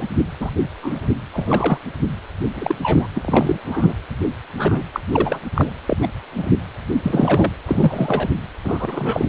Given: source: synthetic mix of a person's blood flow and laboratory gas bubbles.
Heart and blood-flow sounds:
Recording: Doppler ultrasound of blood flow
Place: precordium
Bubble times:
0.00-0.04 s: bubbles
0.40-0.50 s: bubbles
0.81-1.09 s: bubbles
1.33-1.78 s: bubbles
2.54-2.75 s: bubbles
2.83-3.07 s: bubbles
3.14-3.59 s: bubbles
3.65-3.95 s: bubbles
4.57-4.83 s: bubbles
4.93-5.00 s: bubbles
5.12-5.41 s: bubbles
5.55-5.71 s: bubbles
5.86-5.97 s: bubbles
6.02-6.08 s: bubbles
6.37-6.50 s: bubbles
7.02-7.53 s: bubbles
7.67-8.28 s: bubbles
8.64-9.27 s: bubbles
From the record:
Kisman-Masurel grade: 242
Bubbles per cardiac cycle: several, 3 to 8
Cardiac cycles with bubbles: 100%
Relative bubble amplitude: moderate (0.250 to 0.450)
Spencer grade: 3 (all of the cardiac periods contain showers or single bubble signals, but not dominating or overriding the cardiac motion signals)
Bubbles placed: anywhere in the cardiac cycle

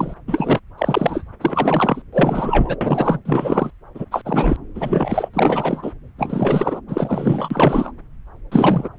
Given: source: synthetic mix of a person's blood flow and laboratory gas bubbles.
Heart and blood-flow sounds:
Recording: Doppler ultrasound of blood flow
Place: subclavian vein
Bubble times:
0.00-0.15 s: bubbles
0.28-0.59 s: bubbles
0.77-1.24 s: bubbles
1.41-2.02 s: bubbles
2.12-2.76 s: bubbles
2.81-3.19 s: bubbles
3.25-3.71 s: bubbles
3.94-4.05 s: bubbles
4.11-4.21 s: bubbles
4.25-4.56 s: bubbles
4.75-5.29 s: bubbles
5.33-5.92 s: bubbles
6.18-6.80 s: bubbles
6.87-7.92 s: bubbles
8.52-8.88 s: bubbles
From the record:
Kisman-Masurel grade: 343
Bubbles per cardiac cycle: rolling drumbeat, 9 or more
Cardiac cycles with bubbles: 100%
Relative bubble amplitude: loud (0.450 to 0.775)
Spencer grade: 3 (all of the cardiac periods contain showers or single bubble signals, but not dominating or overriding the cardiac motion signals)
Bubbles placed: anywhere in the cardiac cycle

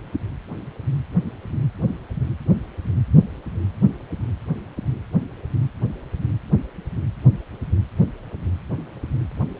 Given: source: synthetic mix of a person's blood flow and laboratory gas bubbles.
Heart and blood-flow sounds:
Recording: Doppler ultrasound of blood flow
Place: precordium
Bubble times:
no bubbles
From the record:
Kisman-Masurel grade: 000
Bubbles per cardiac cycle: 0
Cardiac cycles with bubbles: 0%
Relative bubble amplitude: no bubbles discernible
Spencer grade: 0 (complete lack of bubble signals)

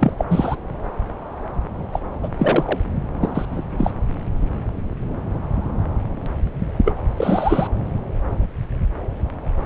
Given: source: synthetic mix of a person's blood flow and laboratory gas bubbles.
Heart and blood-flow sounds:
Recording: Doppler ultrasound of blood flow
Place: subclavian vein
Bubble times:
0.00-0.12 s: bubbles
0.17-0.25 s: bubbles
0.28-0.56 s: bubbles
1.93-2.00 s: bubbles
2.23-2.29 s: bubbles
2.38-2.79 s: bubbles
3.21-3.46 s: bubbles
3.52-3.62 s: bubbles
3.77-3.90 s: bubbles
6.85-6.94 s: bubbles
7.17-7.68 s: bubbles
From the record:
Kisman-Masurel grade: 223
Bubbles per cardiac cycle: several, 3 to 8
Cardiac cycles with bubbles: 10 to 50%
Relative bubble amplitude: loud (0.450 to 0.775)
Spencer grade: 2 (many but less than half of the cardiac periods contain bubble signals, singularly or in groups)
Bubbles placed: anywhere in the cardiac cycle

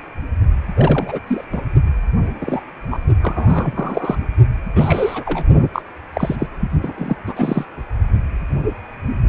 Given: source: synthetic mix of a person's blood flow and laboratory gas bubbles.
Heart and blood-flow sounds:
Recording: Doppler ultrasound of blood flow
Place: precordium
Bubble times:
0.76-1.19 s: bubbles
1.27-1.44 s: bubbles
1.52-1.62 s: bubbles
2.40-2.62 s: bubbles
2.91-2.99 s: bubbles
3.22-4.17 s: bubbles
4.75-5.44 s: bubbles
5.73-5.82 s: bubbles
6.13-6.36 s: bubbles
6.38-6.46 s: bubbles
6.82-6.93 s: bubbles
6.97-7.16 s: bubbles
7.25-7.65 s: bubbles
From the record:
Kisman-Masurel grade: 232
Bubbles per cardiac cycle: several, 3 to 8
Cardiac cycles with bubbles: 50 to 99%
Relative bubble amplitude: moderate (0.250 to 0.450)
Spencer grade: 3 (all of the cardiac periods contain showers or single bubble signals, but not dominating or overriding the cardiac motion signals)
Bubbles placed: only in the low amplitude regions of the cardiac cycle

